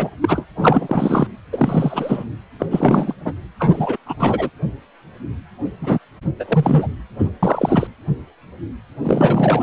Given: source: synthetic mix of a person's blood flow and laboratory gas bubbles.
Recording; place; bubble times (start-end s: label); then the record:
Doppler ultrasound of blood flow; precordium
0.00-0.10 s: bubbles
0.21-0.45 s: bubbles
0.56-1.27 s: bubbles
1.52-2.24 s: bubbles
2.59-2.66 s: bubbles
2.71-3.13 s: bubbles
3.25-3.33 s: bubbles
3.59-3.96 s: bubbles
4.06-4.15 s: bubbles
4.19-4.50 s: bubbles
5.81-5.99 s: bubbles
6.40-6.45 s: bubbles
6.48-6.87 s: bubbles
7.19-7.29 s: bubbles
7.43-7.87 s: bubbles
9.03-9.63 s: bubbles
From the record:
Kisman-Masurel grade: 333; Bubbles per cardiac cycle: rolling drumbeat, 9 or more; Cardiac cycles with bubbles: 50 to 99%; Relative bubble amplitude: loud (0.450 to 0.775); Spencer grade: 3 (all of the cardiac periods contain showers or single bubble signals, but not dominating or overriding the cardiac motion signals); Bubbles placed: anywhere in the cardiac cycle